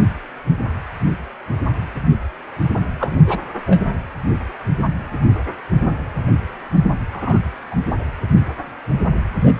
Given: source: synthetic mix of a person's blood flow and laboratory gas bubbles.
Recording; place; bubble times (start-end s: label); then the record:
Doppler ultrasound of blood flow; precordium
2.99-3.17 s: bubbles
3.26-3.42 s: bubbles
3.66-3.83 s: bubbles
7.12-7.42 s: bubbles
7.71-7.75 s: bubbles
7.89-7.96 s: bubbles
9.42-9.54 s: bubbles
From the record:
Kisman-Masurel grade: 222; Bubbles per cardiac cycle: several, 3 to 8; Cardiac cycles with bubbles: 10 to 50%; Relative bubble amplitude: moderate (0.250 to 0.450); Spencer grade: 2 (many but less than half of the cardiac periods contain bubble signals, singularly or in groups); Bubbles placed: anywhere in the cardiac cycle